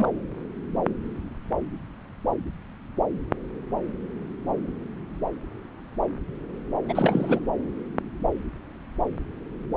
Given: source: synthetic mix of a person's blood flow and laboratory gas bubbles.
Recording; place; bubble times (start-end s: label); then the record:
Doppler ultrasound of blood flow; subclavian vein
0.00-0.08 s: bubbles
6.88-7.39 s: bubbles
From the record:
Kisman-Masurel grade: 212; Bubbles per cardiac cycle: several, 3 to 8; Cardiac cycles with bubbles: 1 to 10%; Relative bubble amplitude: moderate (0.250 to 0.450); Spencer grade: 1 (occasional bubble signal discernible with the cardiac motion signal, with majority of cardiac periods free of bubbles); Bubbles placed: anywhere in the cardiac cycle